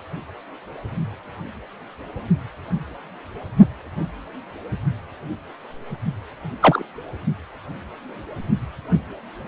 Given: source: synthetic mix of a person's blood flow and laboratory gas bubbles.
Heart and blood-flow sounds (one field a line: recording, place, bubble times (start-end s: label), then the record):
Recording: Doppler ultrasound of blood flow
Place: precordium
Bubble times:
6.61-6.83 s: bubbles
From the record:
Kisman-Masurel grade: 113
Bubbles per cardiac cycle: 1 to 2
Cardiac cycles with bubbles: 1 to 10%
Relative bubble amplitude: loud (0.450 to 0.775)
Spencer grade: 1 (occasional bubble signal discernible with the cardiac motion signal, with majority of cardiac periods free of bubbles)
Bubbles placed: only in the low amplitude regions of the cardiac cycle